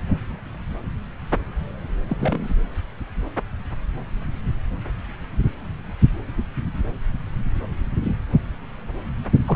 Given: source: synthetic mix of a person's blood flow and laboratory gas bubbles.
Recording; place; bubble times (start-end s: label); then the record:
Doppler ultrasound of blood flow; subclavian vein
2.09-2.55 s: bubbles
9.46-9.56 s: bubbles
From the record:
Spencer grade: 1 (occasional bubble signal discernible with the cardiac motion signal, with majority of cardiac periods free of bubbles); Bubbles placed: anywhere in the cardiac cycle